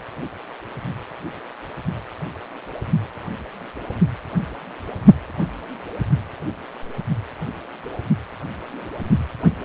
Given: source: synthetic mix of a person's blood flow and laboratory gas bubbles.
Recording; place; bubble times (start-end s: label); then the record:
Doppler ultrasound of blood flow; precordium
no bubbles
From the record:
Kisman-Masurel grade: 000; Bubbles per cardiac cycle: 0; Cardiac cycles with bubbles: 0%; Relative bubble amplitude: no bubbles discernible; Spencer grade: 0 (complete lack of bubble signals)